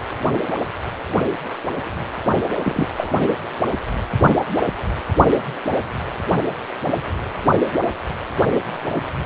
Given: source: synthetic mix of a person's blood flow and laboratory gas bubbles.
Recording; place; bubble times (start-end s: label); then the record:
Doppler ultrasound of blood flow; precordium
2.64-2.88 s: bubbles
2.96-3.12 s: bubbles
From the record:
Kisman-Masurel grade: 212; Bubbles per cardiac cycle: several, 3 to 8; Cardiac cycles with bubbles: 1 to 10%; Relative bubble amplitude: moderate (0.250 to 0.450); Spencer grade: 1 (occasional bubble signal discernible with the cardiac motion signal, with majority of cardiac periods free of bubbles); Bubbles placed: anywhere in the cardiac cycle